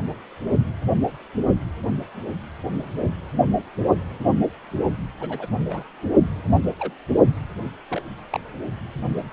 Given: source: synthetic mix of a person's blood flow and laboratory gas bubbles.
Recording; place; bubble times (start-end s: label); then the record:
Doppler ultrasound of blood flow; precordium
5.20-5.47 s: bubbles
5.69-5.83 s: bubbles
6.79-6.94 s: bubbles
7.89-8.02 s: bubbles
8.32-8.40 s: bubbles
From the record:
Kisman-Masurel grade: 121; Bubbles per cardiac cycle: 1 to 2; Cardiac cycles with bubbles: 10 to 50%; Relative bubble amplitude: barely perceptible (0.100 to 0.250); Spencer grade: 2 (many but less than half of the cardiac periods contain bubble signals, singularly or in groups); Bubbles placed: only in the low amplitude regions of the cardiac cycle